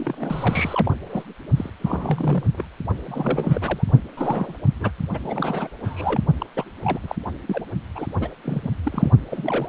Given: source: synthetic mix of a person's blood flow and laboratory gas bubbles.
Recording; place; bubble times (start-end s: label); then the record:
Doppler ultrasound of blood flow; precordium
0.00-0.92 s: bubbles
1.09-1.23 s: bubbles
1.57-1.70 s: bubbles
1.80-2.44 s: bubbles
2.52-2.65 s: bubbles
3.06-3.90 s: bubbles
4.17-4.54 s: bubbles
4.80-4.92 s: bubbles
5.13-5.19 s: bubbles
5.21-5.70 s: bubbles
5.83-6.21 s: bubbles
6.39-6.46 s: bubbles
6.54-6.65 s: bubbles
6.84-6.99 s: bubbles
7.03-7.16 s: bubbles
7.48-7.65 s: bubbles
7.95-8.07 s: bubbles
8.20-8.29 s: bubbles
8.43-8.71 s: bubbles
8.85-9.11 s: bubbles
9.29-9.69 s: bubbles
From the record:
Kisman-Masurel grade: 342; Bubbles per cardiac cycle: rolling drumbeat, 9 or more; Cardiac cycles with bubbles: 100%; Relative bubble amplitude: moderate (0.250 to 0.450); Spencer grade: 3 (all of the cardiac periods contain showers or single bubble signals, but not dominating or overriding the cardiac motion signals); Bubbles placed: only in the low amplitude regions of the cardiac cycle